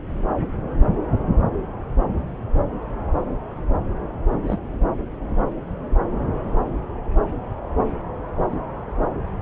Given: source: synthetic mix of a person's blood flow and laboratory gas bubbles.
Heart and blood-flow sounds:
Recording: Doppler ultrasound of blood flow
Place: subclavian vein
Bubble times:
4.46-4.58 s: bubbles
8.47-8.59 s: bubbles
From the record:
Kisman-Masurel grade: 121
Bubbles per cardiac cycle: 1 to 2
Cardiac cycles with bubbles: 10 to 50%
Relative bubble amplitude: barely perceptible (0.100 to 0.250)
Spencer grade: 2 (many but less than half of the cardiac periods contain bubble signals, singularly or in groups)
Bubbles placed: anywhere in the cardiac cycle

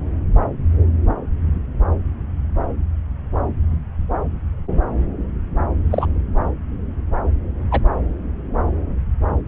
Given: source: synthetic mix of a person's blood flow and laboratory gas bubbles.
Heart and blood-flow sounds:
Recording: Doppler ultrasound of blood flow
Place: subclavian vein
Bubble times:
5.90-6.07 s: bubbles
7.71-7.81 s: bubbles
From the record:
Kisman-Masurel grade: 113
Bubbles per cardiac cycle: 1 to 2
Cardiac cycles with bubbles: 1 to 10%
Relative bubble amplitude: loud (0.450 to 0.775)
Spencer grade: 1 (occasional bubble signal discernible with the cardiac motion signal, with majority of cardiac periods free of bubbles)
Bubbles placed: anywhere in the cardiac cycle

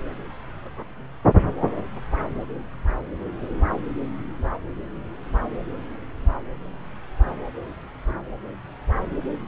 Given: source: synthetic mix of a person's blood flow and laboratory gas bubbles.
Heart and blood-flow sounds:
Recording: Doppler ultrasound of blood flow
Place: subclavian vein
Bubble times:
no bubbles
From the record:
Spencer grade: 0 (complete lack of bubble signals)

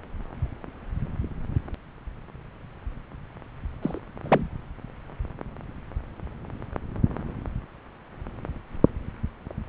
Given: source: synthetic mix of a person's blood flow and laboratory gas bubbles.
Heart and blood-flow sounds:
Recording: Doppler ultrasound of blood flow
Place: subclavian vein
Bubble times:
3.82-3.99 s: bubbles
4.22-4.48 s: bubbles
From the record:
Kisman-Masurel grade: 222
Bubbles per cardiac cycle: several, 3 to 8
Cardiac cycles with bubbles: 10 to 50%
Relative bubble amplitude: moderate (0.250 to 0.450)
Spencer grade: 2 (many but less than half of the cardiac periods contain bubble signals, singularly or in groups)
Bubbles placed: anywhere in the cardiac cycle

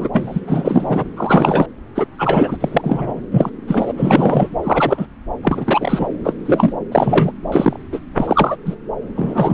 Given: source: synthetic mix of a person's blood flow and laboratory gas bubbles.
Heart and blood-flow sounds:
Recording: Doppler ultrasound of blood flow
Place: subclavian vein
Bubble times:
0.00-0.08 s: bubbles
0.12-0.40 s: bubbles
0.47-1.04 s: bubbles
1.17-1.66 s: bubbles
1.95-2.06 s: bubbles
2.19-2.57 s: bubbles
2.60-3.22 s: bubbles
3.32-3.50 s: bubbles
3.67-3.93 s: bubbles
3.97-4.49 s: bubbles
4.63-5.07 s: bubbles
5.42-6.07 s: bubbles
6.24-6.33 s: bubbles
6.46-6.73 s: bubbles
6.91-7.31 s: bubbles
7.51-7.78 s: bubbles
7.92-7.99 s: bubbles
8.17-8.56 s: bubbles
8.65-8.75 s: bubbles
9.15-9.54 s: bubbles
From the record:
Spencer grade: 3 (all of the cardiac periods contain showers or single bubble signals, but not dominating or overriding the cardiac motion signals)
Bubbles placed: anywhere in the cardiac cycle

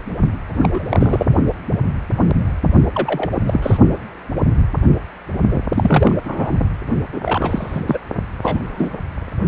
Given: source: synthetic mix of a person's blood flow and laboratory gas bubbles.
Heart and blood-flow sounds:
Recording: Doppler ultrasound of blood flow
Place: precordium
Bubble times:
0.62-0.69 s: bubbles
0.72-1.25 s: bubbles
2.94-3.38 s: bubbles
3.46-3.77 s: bubbles
5.50-5.60 s: bubbles
5.74-6.20 s: bubbles
6.25-6.66 s: bubbles
7.12-7.21 s: bubbles
7.24-7.81 s: bubbles
7.85-7.99 s: bubbles
8.42-8.98 s: bubbles
From the record:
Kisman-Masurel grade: 232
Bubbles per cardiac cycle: several, 3 to 8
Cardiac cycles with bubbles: 50 to 99%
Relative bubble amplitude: moderate (0.250 to 0.450)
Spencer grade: 3 (all of the cardiac periods contain showers or single bubble signals, but not dominating or overriding the cardiac motion signals)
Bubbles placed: only in the low amplitude regions of the cardiac cycle

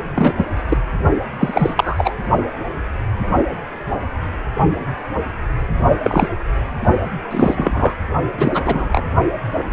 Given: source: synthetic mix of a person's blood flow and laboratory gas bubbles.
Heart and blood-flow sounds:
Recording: Doppler ultrasound of blood flow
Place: precordium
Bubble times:
0.15-0.33 s: bubbles
0.37-0.45 s: bubbles
0.68-0.78 s: bubbles
1.40-2.14 s: bubbles
6.04-6.31 s: bubbles
7.31-7.94 s: bubbles
8.37-8.88 s: bubbles
8.92-9.05 s: bubbles
From the record:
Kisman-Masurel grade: 233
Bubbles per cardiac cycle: several, 3 to 8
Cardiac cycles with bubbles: 50 to 99%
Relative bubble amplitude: loud (0.450 to 0.775)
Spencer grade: 3 (all of the cardiac periods contain showers or single bubble signals, but not dominating or overriding the cardiac motion signals)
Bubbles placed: only in the low amplitude regions of the cardiac cycle

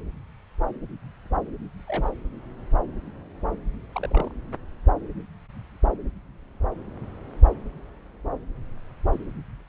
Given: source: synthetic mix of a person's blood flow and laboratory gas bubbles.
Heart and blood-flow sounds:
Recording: Doppler ultrasound of blood flow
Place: subclavian vein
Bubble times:
1.88-2.10 s: bubbles
3.93-4.31 s: bubbles
From the record:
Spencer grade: 1 (occasional bubble signal discernible with the cardiac motion signal, with majority of cardiac periods free of bubbles)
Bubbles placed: anywhere in the cardiac cycle

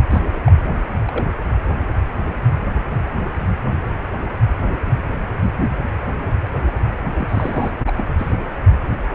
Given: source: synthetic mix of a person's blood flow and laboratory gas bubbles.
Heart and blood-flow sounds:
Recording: Doppler ultrasound of blood flow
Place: precordium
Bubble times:
0.10-0.20 s: bubbles
0.46-0.52 s: bubbles
1.03-1.27 s: bubbles
7.18-7.71 s: bubbles
7.87-7.93 s: bubbles
7.96-8.04 s: bubbles
8.18-8.33 s: bubbles
From the record:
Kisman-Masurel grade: 222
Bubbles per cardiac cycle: several, 3 to 8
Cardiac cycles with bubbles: 10 to 50%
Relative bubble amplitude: moderate (0.250 to 0.450)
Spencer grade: 2 (many but less than half of the cardiac periods contain bubble signals, singularly or in groups)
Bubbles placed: anywhere in the cardiac cycle

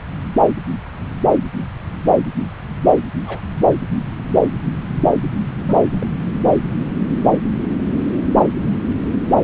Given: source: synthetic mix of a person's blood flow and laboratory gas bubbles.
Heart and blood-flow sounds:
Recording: Doppler ultrasound of blood flow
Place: subclavian vein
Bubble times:
3.25-3.40 s: bubbles
5.54-5.91 s: bubbles
5.94-6.07 s: bubbles
From the record:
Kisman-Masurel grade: 121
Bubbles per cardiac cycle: 1 to 2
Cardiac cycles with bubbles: 10 to 50%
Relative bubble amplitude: barely perceptible (0.100 to 0.250)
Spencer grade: 2 (many but less than half of the cardiac periods contain bubble signals, singularly or in groups)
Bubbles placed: anywhere in the cardiac cycle

